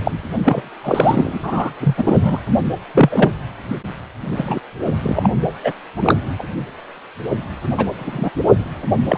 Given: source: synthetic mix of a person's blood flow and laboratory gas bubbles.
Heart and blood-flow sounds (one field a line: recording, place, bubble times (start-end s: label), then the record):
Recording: Doppler ultrasound of blood flow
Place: precordium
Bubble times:
0.00-0.12 s: bubbles
0.42-0.69 s: bubbles
0.83-1.39 s: bubbles
1.43-1.72 s: bubbles
1.79-2.39 s: bubbles
2.95-3.32 s: bubbles
4.37-4.60 s: bubbles
5.03-5.29 s: bubbles
5.63-5.72 s: bubbles
5.96-6.14 s: bubbles
6.38-6.43 s: bubbles
7.77-7.87 s: bubbles
7.98-8.30 s: bubbles
9.04-9.18 s: bubbles
From the record:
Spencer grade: 3 (all of the cardiac periods contain showers or single bubble signals, but not dominating or overriding the cardiac motion signals)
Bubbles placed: anywhere in the cardiac cycle